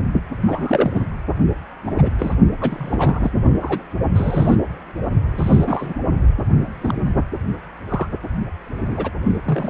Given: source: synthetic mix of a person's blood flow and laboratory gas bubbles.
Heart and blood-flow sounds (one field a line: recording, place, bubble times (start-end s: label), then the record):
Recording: Doppler ultrasound of blood flow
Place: precordium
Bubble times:
0.42-1.03 s: bubbles
1.85-2.09 s: bubbles
2.19-2.34 s: bubbles
2.60-3.30 s: bubbles
3.60-3.82 s: bubbles
4.15-4.56 s: bubbles
5.29-5.93 s: bubbles
6.66-7.12 s: bubbles
7.89-8.07 s: bubbles
8.88-9.11 s: bubbles
9.45-9.69 s: bubbles
From the record:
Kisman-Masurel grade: 242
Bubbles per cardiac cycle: several, 3 to 8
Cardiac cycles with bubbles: 100%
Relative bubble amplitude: moderate (0.250 to 0.450)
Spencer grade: 3 (all of the cardiac periods contain showers or single bubble signals, but not dominating or overriding the cardiac motion signals)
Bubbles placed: only in the low amplitude regions of the cardiac cycle